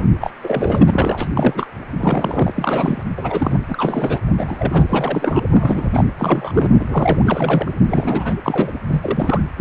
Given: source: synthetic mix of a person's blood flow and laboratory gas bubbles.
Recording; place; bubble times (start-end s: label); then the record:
Doppler ultrasound of blood flow; precordium
0.20-0.31 s: bubbles
0.43-1.27 s: bubbles
1.35-1.67 s: bubbles
1.99-2.52 s: bubbles
2.55-3.03 s: bubbles
3.17-3.59 s: bubbles
3.67-4.21 s: bubbles
4.30-4.85 s: bubbles
4.89-5.44 s: bubbles
5.50-6.04 s: bubbles
6.18-6.71 s: bubbles
6.79-6.85 s: bubbles
6.88-7.25 s: bubbles
7.27-7.71 s: bubbles
7.87-8.34 s: bubbles
8.44-8.73 s: bubbles
8.88-9.42 s: bubbles
9.57-9.61 s: bubbles
From the record:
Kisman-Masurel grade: 342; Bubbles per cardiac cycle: rolling drumbeat, 9 or more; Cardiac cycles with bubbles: 100%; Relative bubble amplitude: moderate (0.250 to 0.450); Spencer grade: 3 (all of the cardiac periods contain showers or single bubble signals, but not dominating or overriding the cardiac motion signals); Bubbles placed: anywhere in the cardiac cycle